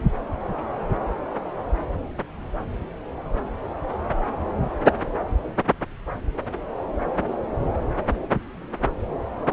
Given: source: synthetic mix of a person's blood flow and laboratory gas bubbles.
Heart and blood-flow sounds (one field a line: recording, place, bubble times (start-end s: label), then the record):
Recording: Doppler ultrasound of blood flow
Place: subclavian vein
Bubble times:
no bubbles
From the record:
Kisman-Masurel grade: 000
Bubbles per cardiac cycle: 0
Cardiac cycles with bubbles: 0%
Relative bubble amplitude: no bubbles discernible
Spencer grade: 0 (complete lack of bubble signals)